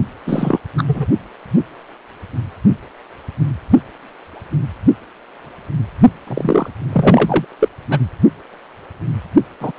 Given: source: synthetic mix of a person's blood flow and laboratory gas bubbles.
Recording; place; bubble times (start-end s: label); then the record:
Doppler ultrasound of blood flow; precordium
0.26-0.58 s: bubbles
0.78-0.84 s: bubbles
0.87-1.06 s: bubbles
6.27-6.70 s: bubbles
6.92-7.45 s: bubbles
7.59-7.68 s: bubbles
7.90-7.99 s: bubbles
9.60-9.71 s: bubbles
From the record:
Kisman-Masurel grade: 223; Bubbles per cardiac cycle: several, 3 to 8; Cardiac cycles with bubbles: 10 to 50%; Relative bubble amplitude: loud (0.450 to 0.775); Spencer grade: 2 (many but less than half of the cardiac periods contain bubble signals, singularly or in groups); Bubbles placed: only in the low amplitude regions of the cardiac cycle